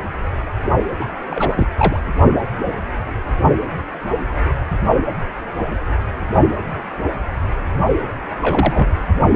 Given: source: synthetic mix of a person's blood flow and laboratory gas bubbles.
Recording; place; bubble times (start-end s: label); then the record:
Doppler ultrasound of blood flow; precordium
0.99-1.05 s: bubbles
1.30-1.68 s: bubbles
1.77-2.00 s: bubbles
8.41-8.88 s: bubbles
From the record:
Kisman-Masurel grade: 222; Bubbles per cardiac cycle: several, 3 to 8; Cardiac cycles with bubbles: 10 to 50%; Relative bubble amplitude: moderate (0.250 to 0.450); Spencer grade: 2 (many but less than half of the cardiac periods contain bubble signals, singularly or in groups); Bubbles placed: only in the low amplitude regions of the cardiac cycle